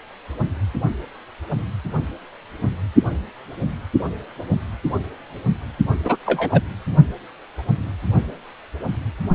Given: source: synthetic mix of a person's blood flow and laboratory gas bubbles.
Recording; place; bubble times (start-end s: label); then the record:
Doppler ultrasound of blood flow; precordium
6.04-6.17 s: bubbles
6.26-6.62 s: bubbles
From the record:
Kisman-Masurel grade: 113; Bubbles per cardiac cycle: 1 to 2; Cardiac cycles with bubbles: 1 to 10%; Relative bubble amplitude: loud (0.450 to 0.775); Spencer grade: 1 (occasional bubble signal discernible with the cardiac motion signal, with majority of cardiac periods free of bubbles); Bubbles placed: only in the low amplitude regions of the cardiac cycle